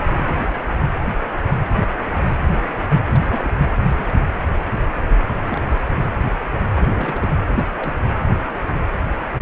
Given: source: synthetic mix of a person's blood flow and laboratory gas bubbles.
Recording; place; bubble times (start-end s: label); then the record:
Doppler ultrasound of blood flow; precordium
0.00-0.03 s: bubbles
0.18-0.22 s: bubbles
3.12-3.49 s: bubbles
3.90-4.14 s: bubbles
5.49-5.65 s: bubbles
5.71-5.79 s: bubbles
6.79-7.30 s: bubbles
7.52-7.67 s: bubbles
7.78-8.01 s: bubbles
From the record:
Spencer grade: 2 (many but less than half of the cardiac periods contain bubble signals, singularly or in groups); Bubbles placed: anywhere in the cardiac cycle